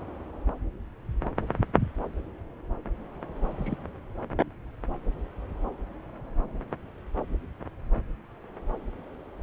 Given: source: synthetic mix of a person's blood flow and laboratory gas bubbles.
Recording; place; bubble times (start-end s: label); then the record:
Doppler ultrasound of blood flow; subclavian vein
3.50-3.86 s: bubbles
From the record:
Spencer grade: 1 (occasional bubble signal discernible with the cardiac motion signal, with majority of cardiac periods free of bubbles); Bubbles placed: anywhere in the cardiac cycle